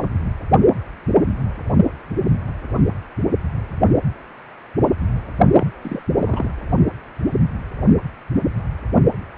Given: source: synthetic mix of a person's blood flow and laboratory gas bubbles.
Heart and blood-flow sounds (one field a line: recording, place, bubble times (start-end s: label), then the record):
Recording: Doppler ultrasound of blood flow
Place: precordium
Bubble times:
5.46-5.71 s: bubbles
5.81-6.03 s: bubbles
6.18-6.50 s: bubbles
From the record:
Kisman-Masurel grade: 212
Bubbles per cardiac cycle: several, 3 to 8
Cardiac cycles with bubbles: 1 to 10%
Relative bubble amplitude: moderate (0.250 to 0.450)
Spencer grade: 1 (occasional bubble signal discernible with the cardiac motion signal, with majority of cardiac periods free of bubbles)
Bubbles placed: anywhere in the cardiac cycle